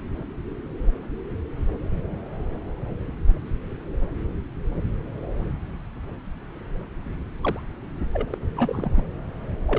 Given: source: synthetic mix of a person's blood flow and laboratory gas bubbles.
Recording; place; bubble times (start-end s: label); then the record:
Doppler ultrasound of blood flow; subclavian vein
7.41-7.60 s: bubbles
8.13-8.28 s: bubbles
8.30-8.38 s: bubbles
8.54-9.04 s: bubbles
9.66-9.79 s: bubbles
From the record:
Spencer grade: 2 (many but less than half of the cardiac periods contain bubble signals, singularly or in groups); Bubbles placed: anywhere in the cardiac cycle